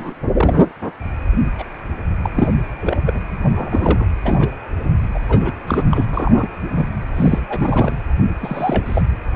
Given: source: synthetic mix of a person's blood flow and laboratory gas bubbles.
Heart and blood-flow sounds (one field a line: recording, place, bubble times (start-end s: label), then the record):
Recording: Doppler ultrasound of blood flow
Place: precordium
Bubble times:
0.00-0.14 s: bubbles
0.36-0.61 s: bubbles
1.58-1.64 s: bubbles
2.21-2.29 s: bubbles
2.35-2.51 s: bubbles
2.81-3.21 s: bubbles
3.55-4.05 s: bubbles
4.24-4.50 s: bubbles
4.83-4.89 s: bubbles
5.14-5.20 s: bubbles
5.28-5.52 s: bubbles
5.67-5.83 s: bubbles
5.91-6.06 s: bubbles
6.12-6.50 s: bubbles
6.69-6.88 s: bubbles
7.15-7.46 s: bubbles
7.48-7.96 s: bubbles
8.40-9.02 s: bubbles
From the record:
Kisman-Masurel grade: 242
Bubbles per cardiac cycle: several, 3 to 8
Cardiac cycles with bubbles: 100%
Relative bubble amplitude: moderate (0.250 to 0.450)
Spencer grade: 3 (all of the cardiac periods contain showers or single bubble signals, but not dominating or overriding the cardiac motion signals)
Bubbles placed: anywhere in the cardiac cycle